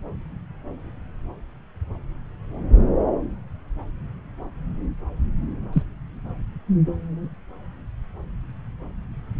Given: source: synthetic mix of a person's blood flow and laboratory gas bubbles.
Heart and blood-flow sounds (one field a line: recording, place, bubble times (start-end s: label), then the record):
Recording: Doppler ultrasound of blood flow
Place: subclavian vein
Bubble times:
5.72-5.83 s: bubbles
From the record:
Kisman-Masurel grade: 123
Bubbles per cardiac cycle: 1 to 2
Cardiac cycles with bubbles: 10 to 50%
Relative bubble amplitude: loud (0.450 to 0.775)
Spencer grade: 2 (many but less than half of the cardiac periods contain bubble signals, singularly or in groups)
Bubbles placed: anywhere in the cardiac cycle